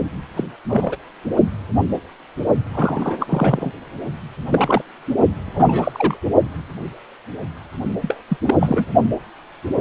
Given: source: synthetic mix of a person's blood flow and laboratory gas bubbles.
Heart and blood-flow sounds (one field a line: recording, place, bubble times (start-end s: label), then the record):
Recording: Doppler ultrasound of blood flow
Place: precordium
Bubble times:
0.35-0.44 s: bubbles
0.67-0.96 s: bubbles
2.73-3.71 s: bubbles
4.50-4.82 s: bubbles
5.45-6.17 s: bubbles
8.02-8.20 s: bubbles
8.28-8.37 s: bubbles
8.46-8.55 s: bubbles
8.60-8.85 s: bubbles
From the record:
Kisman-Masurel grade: 233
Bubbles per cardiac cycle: several, 3 to 8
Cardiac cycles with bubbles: 50 to 99%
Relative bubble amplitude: loud (0.450 to 0.775)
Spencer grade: 3 (all of the cardiac periods contain showers or single bubble signals, but not dominating or overriding the cardiac motion signals)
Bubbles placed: only in the low amplitude regions of the cardiac cycle